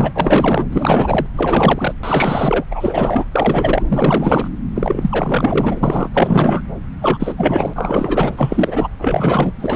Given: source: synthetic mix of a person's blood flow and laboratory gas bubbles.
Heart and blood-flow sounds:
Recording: Doppler ultrasound of blood flow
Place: subclavian vein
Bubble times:
0.00-0.12 s: bubbles
0.14-0.65 s: bubbles
0.72-1.27 s: bubbles
1.35-1.94 s: bubbles
2.03-2.65 s: bubbles
2.70-3.25 s: bubbles
3.31-3.83 s: bubbles
3.88-4.48 s: bubbles
4.74-6.09 s: bubbles
6.13-6.62 s: bubbles
7.01-8.90 s: bubbles
8.98-9.53 s: bubbles
9.59-9.76 s: bubbles
From the record:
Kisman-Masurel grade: 444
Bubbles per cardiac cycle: continuous sound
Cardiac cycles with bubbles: 100%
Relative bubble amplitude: maximal (0.775 to 0.999)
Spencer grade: 4 (maximum detectable bubble signal sounding continuously throughout systole and diastole of every cardiac period, and overriding the amplitude of the normal cardiac signals)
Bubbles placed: anywhere in the cardiac cycle

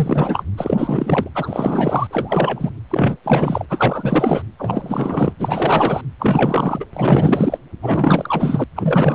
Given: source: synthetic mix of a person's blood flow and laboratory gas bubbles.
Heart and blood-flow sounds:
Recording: Doppler ultrasound of blood flow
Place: precordium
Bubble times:
0.00-0.44 s: bubbles
0.57-1.29 s: bubbles
1.35-2.07 s: bubbles
2.10-2.70 s: bubbles
2.90-3.17 s: bubbles
3.24-3.65 s: bubbles
3.69-4.42 s: bubbles
4.58-5.33 s: bubbles
5.39-6.01 s: bubbles
6.19-6.85 s: bubbles
6.93-7.58 s: bubbles
7.83-8.64 s: bubbles
8.75-9.15 s: bubbles
From the record:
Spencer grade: 4 (maximum detectable bubble signal sounding continuously throughout systole and diastole of every cardiac period, and overriding the amplitude of the normal cardiac signals)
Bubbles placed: anywhere in the cardiac cycle

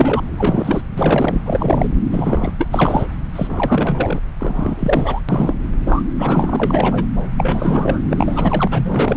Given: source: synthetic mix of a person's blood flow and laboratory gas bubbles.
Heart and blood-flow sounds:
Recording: Doppler ultrasound of blood flow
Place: subclavian vein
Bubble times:
0.00-0.22 s: bubbles
0.38-0.81 s: bubbles
0.98-1.41 s: bubbles
1.45-1.89 s: bubbles
2.11-2.53 s: bubbles
2.58-3.06 s: bubbles
3.35-4.20 s: bubbles
4.40-5.21 s: bubbles
5.29-5.54 s: bubbles
5.86-6.03 s: bubbles
6.18-7.05 s: bubbles
7.38-8.00 s: bubbles
8.10-8.67 s: bubbles
8.71-9.17 s: bubbles
From the record:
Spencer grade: 3 (all of the cardiac periods contain showers or single bubble signals, but not dominating or overriding the cardiac motion signals)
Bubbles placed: anywhere in the cardiac cycle

